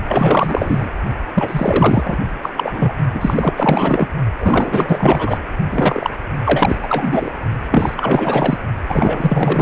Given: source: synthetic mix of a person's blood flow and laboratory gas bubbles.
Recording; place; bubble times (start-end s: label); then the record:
Doppler ultrasound of blood flow; precordium
0.08-0.89 s: bubbles
1.34-2.18 s: bubbles
2.42-2.51 s: bubbles
2.56-2.94 s: bubbles
3.14-4.08 s: bubbles
4.40-5.38 s: bubbles
5.71-6.10 s: bubbles
6.44-6.77 s: bubbles
6.82-7.31 s: bubbles
7.71-8.58 s: bubbles
8.88-9.62 s: bubbles
From the record:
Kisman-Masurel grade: 444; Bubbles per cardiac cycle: continuous sound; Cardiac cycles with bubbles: 100%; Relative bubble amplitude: maximal (0.775 to 0.999); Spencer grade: 4 (maximum detectable bubble signal sounding continuously throughout systole and diastole of every cardiac period, and overriding the amplitude of the normal cardiac signals); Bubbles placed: only in the low amplitude regions of the cardiac cycle